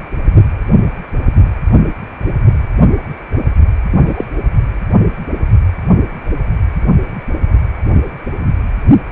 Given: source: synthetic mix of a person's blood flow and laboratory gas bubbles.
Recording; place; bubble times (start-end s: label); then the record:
Doppler ultrasound of blood flow; precordium
3.91-4.25 s: bubbles
From the record:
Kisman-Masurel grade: 213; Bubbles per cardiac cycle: several, 3 to 8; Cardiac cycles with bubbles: 1 to 10%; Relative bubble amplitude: loud (0.450 to 0.775); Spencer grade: 1 (occasional bubble signal discernible with the cardiac motion signal, with majority of cardiac periods free of bubbles); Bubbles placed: anywhere in the cardiac cycle